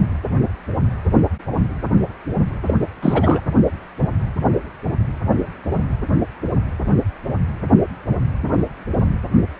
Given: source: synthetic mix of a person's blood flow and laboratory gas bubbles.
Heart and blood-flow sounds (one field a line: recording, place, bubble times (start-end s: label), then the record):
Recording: Doppler ultrasound of blood flow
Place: precordium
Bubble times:
2.67-2.75 s: bubbles
3.03-3.41 s: bubbles
From the record:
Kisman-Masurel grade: 223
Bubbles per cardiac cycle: several, 3 to 8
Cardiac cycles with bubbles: 10 to 50%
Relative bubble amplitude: loud (0.450 to 0.775)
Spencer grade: 2 (many but less than half of the cardiac periods contain bubble signals, singularly or in groups)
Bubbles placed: anywhere in the cardiac cycle